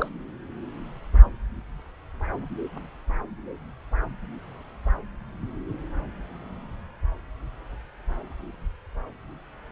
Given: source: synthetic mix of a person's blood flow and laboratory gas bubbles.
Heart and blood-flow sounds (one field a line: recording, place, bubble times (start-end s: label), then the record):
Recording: Doppler ultrasound of blood flow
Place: subclavian vein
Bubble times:
0.00-0.08 s: bubbles
From the record:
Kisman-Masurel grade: 211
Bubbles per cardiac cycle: several, 3 to 8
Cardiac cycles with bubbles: 1 to 10%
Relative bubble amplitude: barely perceptible (0.100 to 0.250)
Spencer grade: 1 (occasional bubble signal discernible with the cardiac motion signal, with majority of cardiac periods free of bubbles)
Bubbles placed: anywhere in the cardiac cycle